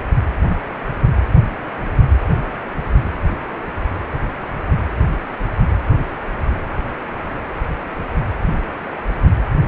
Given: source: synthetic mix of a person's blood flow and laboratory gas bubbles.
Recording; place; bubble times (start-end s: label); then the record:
Doppler ultrasound of blood flow; precordium
no bubbles
From the record:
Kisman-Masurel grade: 000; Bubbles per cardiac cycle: 0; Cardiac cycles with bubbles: 0%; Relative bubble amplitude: no bubbles discernible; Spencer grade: 0 (complete lack of bubble signals)